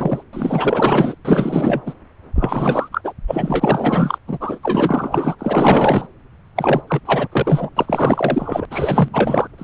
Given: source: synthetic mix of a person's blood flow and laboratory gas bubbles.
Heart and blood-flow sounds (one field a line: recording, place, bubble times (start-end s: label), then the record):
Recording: Doppler ultrasound of blood flow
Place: subclavian vein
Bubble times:
0.00-0.23 s: bubbles
0.33-1.15 s: bubbles
1.25-1.82 s: bubbles
1.86-1.94 s: bubbles
2.35-2.89 s: bubbles
2.92-3.13 s: bubbles
3.27-4.18 s: bubbles
4.27-4.59 s: bubbles
4.62-5.36 s: bubbles
5.39-6.07 s: bubbles
6.56-6.82 s: bubbles
6.88-7.00 s: bubbles
7.05-7.28 s: bubbles
7.32-7.70 s: bubbles
7.77-8.66 s: bubbles
8.71-9.09 s: bubbles
9.12-9.47 s: bubbles
9.58-9.64 s: bubbles
From the record:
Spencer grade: 4 (maximum detectable bubble signal sounding continuously throughout systole and diastole of every cardiac period, and overriding the amplitude of the normal cardiac signals)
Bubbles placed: anywhere in the cardiac cycle